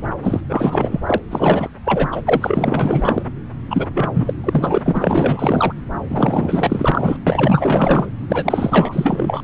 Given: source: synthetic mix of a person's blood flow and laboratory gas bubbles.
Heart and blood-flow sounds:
Doppler ultrasound of blood flow; subclavian vein
0.22-0.40 s: bubbles
0.49-1.00 s: bubbles
1.06-1.18 s: bubbles
1.30-1.68 s: bubbles
1.84-2.08 s: bubbles
2.12-2.22 s: bubbles
2.26-3.23 s: bubbles
3.70-3.87 s: bubbles
3.94-4.08 s: bubbles
4.13-4.33 s: bubbles
4.43-4.81 s: bubbles
4.84-5.73 s: bubbles
6.09-7.17 s: bubbles
7.26-8.06 s: bubbles
8.28-9.42 s: bubbles
From the record:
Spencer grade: 4 (maximum detectable bubble signal sounding continuously throughout systole and diastole of every cardiac period, and overriding the amplitude of the normal cardiac signals); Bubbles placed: anywhere in the cardiac cycle

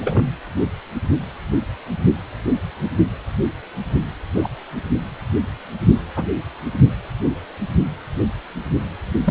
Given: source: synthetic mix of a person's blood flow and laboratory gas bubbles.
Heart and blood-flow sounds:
Doppler ultrasound of blood flow; precordium
0.02-0.33 s: bubbles
4.35-4.50 s: bubbles
6.16-6.28 s: bubbles
9.24-9.31 s: bubbles
From the record:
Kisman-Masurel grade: 122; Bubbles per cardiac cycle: 1 to 2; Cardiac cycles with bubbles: 10 to 50%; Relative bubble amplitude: moderate (0.250 to 0.450); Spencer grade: 2 (many but less than half of the cardiac periods contain bubble signals, singularly or in groups); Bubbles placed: anywhere in the cardiac cycle

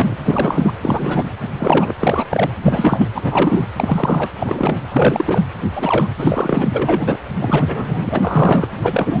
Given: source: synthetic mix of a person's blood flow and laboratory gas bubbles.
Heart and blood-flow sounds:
Doppler ultrasound of blood flow; precordium
0.00-0.16 s: bubbles
0.23-0.73 s: bubbles
0.82-1.27 s: bubbles
1.40-1.50 s: bubbles
1.58-1.94 s: bubbles
2.00-2.50 s: bubbles
2.62-3.08 s: bubbles
3.15-3.65 s: bubbles
3.76-4.29 s: bubbles
4.39-4.78 s: bubbles
4.91-5.42 s: bubbles
5.75-6.07 s: bubbles
6.18-7.18 s: bubbles
7.39-8.68 s: bubbles
8.83-9.20 s: bubbles
From the record:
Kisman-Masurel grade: 343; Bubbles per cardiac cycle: rolling drumbeat, 9 or more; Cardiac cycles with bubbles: 100%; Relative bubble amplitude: loud (0.450 to 0.775); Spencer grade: 3 (all of the cardiac periods contain showers or single bubble signals, but not dominating or overriding the cardiac motion signals); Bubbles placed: anywhere in the cardiac cycle

